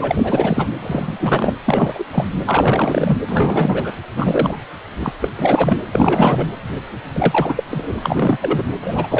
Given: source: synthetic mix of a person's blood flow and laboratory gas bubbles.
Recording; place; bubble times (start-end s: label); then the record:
Doppler ultrasound of blood flow; precordium
0.00-0.67 s: bubbles
0.79-1.55 s: bubbles
1.66-2.04 s: bubbles
2.11-2.27 s: bubbles
2.46-3.17 s: bubbles
3.27-3.92 s: bubbles
4.16-4.56 s: bubbles
5.00-5.13 s: bubbles
5.22-5.28 s: bubbles
5.35-5.81 s: bubbles
5.91-6.46 s: bubbles
7.12-7.63 s: bubbles
7.71-7.99 s: bubbles
8.03-8.38 s: bubbles
8.41-8.63 s: bubbles
8.81-9.20 s: bubbles
From the record:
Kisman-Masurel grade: 343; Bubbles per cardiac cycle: rolling drumbeat, 9 or more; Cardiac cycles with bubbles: 100%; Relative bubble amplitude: loud (0.450 to 0.775); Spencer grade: 3 (all of the cardiac periods contain showers or single bubble signals, but not dominating or overriding the cardiac motion signals); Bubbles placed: anywhere in the cardiac cycle